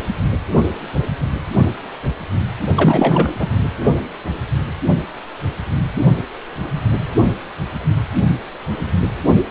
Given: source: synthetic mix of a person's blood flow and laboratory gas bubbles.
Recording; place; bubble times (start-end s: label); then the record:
Doppler ultrasound of blood flow; precordium
2.76-3.34 s: bubbles
3.39-3.48 s: bubbles
From the record:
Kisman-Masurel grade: 213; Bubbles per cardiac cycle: several, 3 to 8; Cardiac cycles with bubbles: 1 to 10%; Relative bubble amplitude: loud (0.450 to 0.775); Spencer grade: 1 (occasional bubble signal discernible with the cardiac motion signal, with majority of cardiac periods free of bubbles); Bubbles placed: only in the low amplitude regions of the cardiac cycle